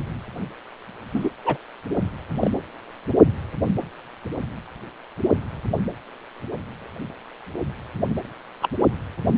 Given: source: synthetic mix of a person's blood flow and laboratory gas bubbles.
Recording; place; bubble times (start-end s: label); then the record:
Doppler ultrasound of blood flow; precordium
1.14-1.29 s: bubbles
1.45-1.57 s: bubbles
2.40-2.51 s: bubbles
8.62-8.69 s: bubbles
From the record:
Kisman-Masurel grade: 122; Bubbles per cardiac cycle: 1 to 2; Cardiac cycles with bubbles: 10 to 50%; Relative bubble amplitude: moderate (0.250 to 0.450); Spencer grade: 2 (many but less than half of the cardiac periods contain bubble signals, singularly or in groups); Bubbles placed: anywhere in the cardiac cycle